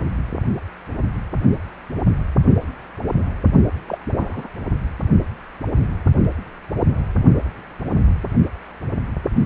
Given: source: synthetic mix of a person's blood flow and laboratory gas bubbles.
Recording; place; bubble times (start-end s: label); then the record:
Doppler ultrasound of blood flow; precordium
3.88-3.98 s: bubbles
4.19-4.48 s: bubbles
From the record:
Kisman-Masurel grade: 112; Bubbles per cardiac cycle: 1 to 2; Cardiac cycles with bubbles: 1 to 10%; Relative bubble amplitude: moderate (0.250 to 0.450); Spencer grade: 1 (occasional bubble signal discernible with the cardiac motion signal, with majority of cardiac periods free of bubbles); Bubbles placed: only in the low amplitude regions of the cardiac cycle